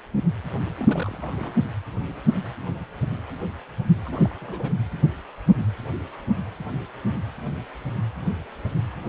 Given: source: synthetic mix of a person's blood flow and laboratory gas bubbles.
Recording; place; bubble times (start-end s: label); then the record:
Doppler ultrasound of blood flow; precordium
0.79-1.17 s: bubbles
1.20-1.52 s: bubbles
4.04-4.35 s: bubbles
4.40-4.73 s: bubbles
From the record:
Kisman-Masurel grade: 221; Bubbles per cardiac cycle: several, 3 to 8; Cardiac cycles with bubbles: 10 to 50%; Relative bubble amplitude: barely perceptible (0.100 to 0.250); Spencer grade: 2 (many but less than half of the cardiac periods contain bubble signals, singularly or in groups); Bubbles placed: anywhere in the cardiac cycle